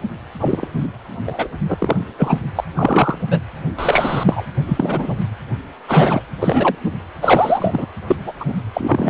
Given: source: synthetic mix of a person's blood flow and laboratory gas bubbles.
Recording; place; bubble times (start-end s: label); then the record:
Doppler ultrasound of blood flow; precordium
0.39-0.68 s: bubbles
0.76-0.88 s: bubbles
1.26-1.48 s: bubbles
1.68-1.96 s: bubbles
2.18-2.38 s: bubbles
2.55-2.64 s: bubbles
2.74-3.19 s: bubbles
3.29-3.40 s: bubbles
3.79-4.24 s: bubbles
4.26-4.45 s: bubbles
4.66-5.17 s: bubbles
5.88-6.21 s: bubbles
6.40-6.75 s: bubbles
7.21-7.87 s: bubbles
8.07-8.16 s: bubbles
8.25-8.32 s: bubbles
8.39-8.45 s: bubbles
8.47-8.54 s: bubbles
8.74-9.10 s: bubbles
From the record:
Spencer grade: 3 (all of the cardiac periods contain showers or single bubble signals, but not dominating or overriding the cardiac motion signals); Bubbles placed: anywhere in the cardiac cycle